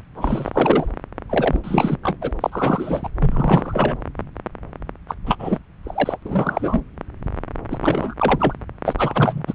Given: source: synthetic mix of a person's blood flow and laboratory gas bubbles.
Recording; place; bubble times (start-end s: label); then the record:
Doppler ultrasound of blood flow; subclavian vein
0.14-0.92 s: bubbles
1.29-1.60 s: bubbles
1.64-1.98 s: bubbles
2.02-2.17 s: bubbles
2.21-2.31 s: bubbles
2.40-3.09 s: bubbles
3.20-3.96 s: bubbles
5.08-5.16 s: bubbles
5.26-5.37 s: bubbles
5.39-5.58 s: bubbles
5.83-6.18 s: bubbles
6.25-6.81 s: bubbles
7.70-7.79 s: bubbles
7.82-8.14 s: bubbles
8.19-8.54 s: bubbles
8.85-8.94 s: bubbles
8.98-9.45 s: bubbles
9.47-9.54 s: bubbles
From the record:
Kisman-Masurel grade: 333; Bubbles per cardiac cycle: rolling drumbeat, 9 or more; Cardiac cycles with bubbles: 50 to 99%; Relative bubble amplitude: loud (0.450 to 0.775); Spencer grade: 3 (all of the cardiac periods contain showers or single bubble signals, but not dominating or overriding the cardiac motion signals); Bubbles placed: anywhere in the cardiac cycle